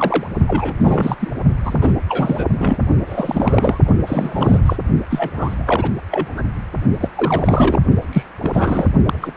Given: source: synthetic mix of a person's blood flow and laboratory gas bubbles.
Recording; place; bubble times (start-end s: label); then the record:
Doppler ultrasound of blood flow; precordium
0.00-0.27 s: bubbles
0.47-0.76 s: bubbles
0.80-1.16 s: bubbles
1.19-1.30 s: bubbles
1.64-1.93 s: bubbles
2.08-2.45 s: bubbles
2.58-2.76 s: bubbles
3.06-3.79 s: bubbles
3.84-3.93 s: bubbles
4.06-4.76 s: bubbles
5.09-5.30 s: bubbles
5.33-5.90 s: bubbles
6.10-6.33 s: bubbles
6.37-6.42 s: bubbles
7.00-7.09 s: bubbles
7.15-7.80 s: bubbles
8.12-8.23 s: bubbles
8.41-8.88 s: bubbles
9.05-9.19 s: bubbles
9.21-9.33 s: bubbles
From the record:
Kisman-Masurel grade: 342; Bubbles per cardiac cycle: rolling drumbeat, 9 or more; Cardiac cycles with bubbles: 100%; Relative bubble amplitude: moderate (0.250 to 0.450); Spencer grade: 3 (all of the cardiac periods contain showers or single bubble signals, but not dominating or overriding the cardiac motion signals); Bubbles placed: only in the low amplitude regions of the cardiac cycle